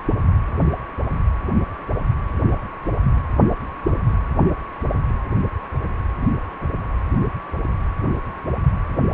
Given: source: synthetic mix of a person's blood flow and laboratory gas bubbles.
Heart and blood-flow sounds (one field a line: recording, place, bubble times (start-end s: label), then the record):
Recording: Doppler ultrasound of blood flow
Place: precordium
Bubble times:
no bubbles
From the record:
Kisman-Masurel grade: 000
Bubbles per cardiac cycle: 0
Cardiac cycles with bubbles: 0%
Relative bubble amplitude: no bubbles discernible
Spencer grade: 0 (complete lack of bubble signals)